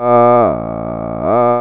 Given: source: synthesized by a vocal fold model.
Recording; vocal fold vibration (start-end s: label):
sustained vowel that changes in the middle
0.00-0.38 s: 120.6 Hz, open quotient 0.28
0.58-1.18 s: 56.3 Hz, open quotient 0.20
1.38-1.61 s: 120.6 Hz, open quotient 0.28